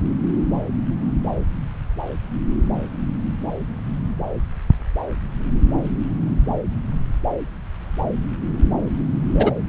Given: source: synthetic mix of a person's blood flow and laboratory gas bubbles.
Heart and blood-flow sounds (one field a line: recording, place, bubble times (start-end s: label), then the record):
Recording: Doppler ultrasound of blood flow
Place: subclavian vein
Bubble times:
9.34-9.52 s: bubbles
From the record:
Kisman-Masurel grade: 113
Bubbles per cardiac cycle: 1 to 2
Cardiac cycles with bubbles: 1 to 10%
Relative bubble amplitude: loud (0.450 to 0.775)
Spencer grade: 1 (occasional bubble signal discernible with the cardiac motion signal, with majority of cardiac periods free of bubbles)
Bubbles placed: anywhere in the cardiac cycle